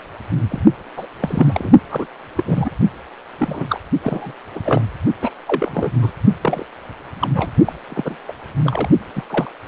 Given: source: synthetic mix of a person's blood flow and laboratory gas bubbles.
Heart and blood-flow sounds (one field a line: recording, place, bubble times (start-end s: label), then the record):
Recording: Doppler ultrasound of blood flow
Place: precordium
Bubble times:
0.50-0.61 s: bubbles
0.96-1.06 s: bubbles
1.21-1.71 s: bubbles
1.90-2.05 s: bubbles
2.37-2.43 s: bubbles
2.46-2.71 s: bubbles
3.38-3.79 s: bubbles
4.02-4.33 s: bubbles
4.55-4.60 s: bubbles
4.65-4.81 s: bubbles
5.21-5.29 s: bubbles
5.47-5.91 s: bubbles
6.02-6.12 s: bubbles
6.42-6.65 s: bubbles
7.21-7.28 s: bubbles
7.34-7.50 s: bubbles
7.66-7.72 s: bubbles
7.89-8.16 s: bubbles
8.28-8.33 s: bubbles
8.65-8.90 s: bubbles
9.16-9.23 s: bubbles
9.29-9.51 s: bubbles
From the record:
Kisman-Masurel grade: 232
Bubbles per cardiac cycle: several, 3 to 8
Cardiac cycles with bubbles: 50 to 99%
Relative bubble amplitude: moderate (0.250 to 0.450)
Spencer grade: 3 (all of the cardiac periods contain showers or single bubble signals, but not dominating or overriding the cardiac motion signals)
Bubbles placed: only in the low amplitude regions of the cardiac cycle